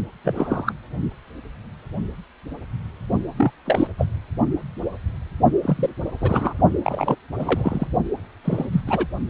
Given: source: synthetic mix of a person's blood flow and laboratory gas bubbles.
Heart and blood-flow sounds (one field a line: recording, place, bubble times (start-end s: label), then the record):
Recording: Doppler ultrasound of blood flow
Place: precordium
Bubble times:
0.24-0.73 s: bubbles
3.38-3.52 s: bubbles
3.65-3.87 s: bubbles
3.98-4.06 s: bubbles
5.63-5.89 s: bubbles
6.18-6.53 s: bubbles
6.83-7.15 s: bubbles
7.38-7.87 s: bubbles
8.44-8.65 s: bubbles
8.72-8.81 s: bubbles
8.87-9.06 s: bubbles
From the record:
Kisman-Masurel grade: 232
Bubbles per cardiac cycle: several, 3 to 8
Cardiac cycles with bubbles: 50 to 99%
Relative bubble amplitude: moderate (0.250 to 0.450)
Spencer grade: 3 (all of the cardiac periods contain showers or single bubble signals, but not dominating or overriding the cardiac motion signals)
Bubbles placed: only in the low amplitude regions of the cardiac cycle